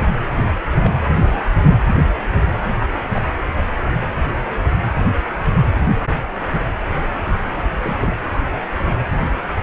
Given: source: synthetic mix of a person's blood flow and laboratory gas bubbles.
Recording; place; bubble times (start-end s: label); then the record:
Doppler ultrasound of blood flow; precordium
0.36-0.46 s: bubbles
0.82-0.91 s: bubbles
1.17-1.41 s: bubbles
2.79-2.86 s: bubbles
3.12-3.22 s: bubbles
7.82-7.97 s: bubbles
8.01-8.12 s: bubbles
From the record:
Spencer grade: 2 (many but less than half of the cardiac periods contain bubble signals, singularly or in groups); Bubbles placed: anywhere in the cardiac cycle